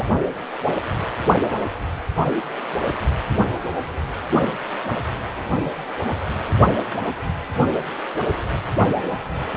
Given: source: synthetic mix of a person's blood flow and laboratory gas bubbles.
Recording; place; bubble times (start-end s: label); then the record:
Doppler ultrasound of blood flow; precordium
0.00-0.04 s: bubbles
From the record:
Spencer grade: 1 (occasional bubble signal discernible with the cardiac motion signal, with majority of cardiac periods free of bubbles); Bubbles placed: only in the low amplitude regions of the cardiac cycle